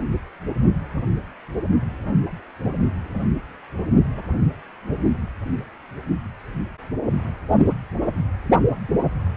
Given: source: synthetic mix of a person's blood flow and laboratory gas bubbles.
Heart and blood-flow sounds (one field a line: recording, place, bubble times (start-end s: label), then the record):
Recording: Doppler ultrasound of blood flow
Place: precordium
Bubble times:
no bubbles
From the record:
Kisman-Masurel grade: 000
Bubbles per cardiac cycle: 0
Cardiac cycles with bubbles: 0%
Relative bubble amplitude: no bubbles discernible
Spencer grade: 0 (complete lack of bubble signals)